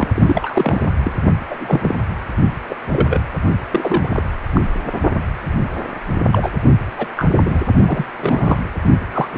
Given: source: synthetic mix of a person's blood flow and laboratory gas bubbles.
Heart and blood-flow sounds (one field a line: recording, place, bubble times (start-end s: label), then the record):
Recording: Doppler ultrasound of blood flow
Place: precordium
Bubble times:
0.00-0.08 s: bubbles
0.15-0.86 s: bubbles
1.03-1.12 s: bubbles
1.50-1.95 s: bubbles
2.69-2.75 s: bubbles
2.92-3.22 s: bubbles
3.71-4.22 s: bubbles
4.53-4.61 s: bubbles
6.31-6.52 s: bubbles
6.98-7.06 s: bubbles
7.16-7.34 s: bubbles
7.40-7.64 s: bubbles
7.85-8.06 s: bubbles
8.21-8.59 s: bubbles
9.12-9.29 s: bubbles
9.32-9.38 s: bubbles
From the record:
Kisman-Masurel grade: 242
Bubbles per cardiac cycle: several, 3 to 8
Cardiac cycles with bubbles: 100%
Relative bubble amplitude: moderate (0.250 to 0.450)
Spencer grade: 3 (all of the cardiac periods contain showers or single bubble signals, but not dominating or overriding the cardiac motion signals)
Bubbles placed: only in the low amplitude regions of the cardiac cycle